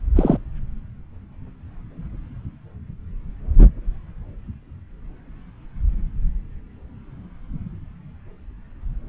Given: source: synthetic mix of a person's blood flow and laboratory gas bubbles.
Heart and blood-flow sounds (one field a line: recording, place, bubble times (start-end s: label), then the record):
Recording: Doppler ultrasound of blood flow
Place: subclavian vein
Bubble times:
0.16-0.38 s: bubbles
From the record:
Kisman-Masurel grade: 113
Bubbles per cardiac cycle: 1 to 2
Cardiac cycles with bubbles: 1 to 10%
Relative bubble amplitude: loud (0.450 to 0.775)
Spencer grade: 1 (occasional bubble signal discernible with the cardiac motion signal, with majority of cardiac periods free of bubbles)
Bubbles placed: anywhere in the cardiac cycle